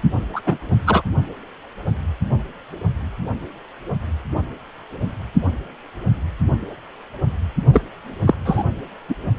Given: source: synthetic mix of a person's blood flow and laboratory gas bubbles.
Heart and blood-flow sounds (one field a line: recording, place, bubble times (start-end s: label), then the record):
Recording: Doppler ultrasound of blood flow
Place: precordium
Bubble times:
0.33-0.41 s: bubbles
0.45-0.57 s: bubbles
0.86-1.02 s: bubbles
7.73-7.81 s: bubbles
8.26-8.35 s: bubbles
8.45-8.65 s: bubbles
9.09-9.15 s: bubbles
From the record:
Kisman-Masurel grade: 223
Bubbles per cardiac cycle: several, 3 to 8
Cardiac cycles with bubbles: 10 to 50%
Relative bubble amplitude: loud (0.450 to 0.775)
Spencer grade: 2 (many but less than half of the cardiac periods contain bubble signals, singularly or in groups)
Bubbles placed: only in the low amplitude regions of the cardiac cycle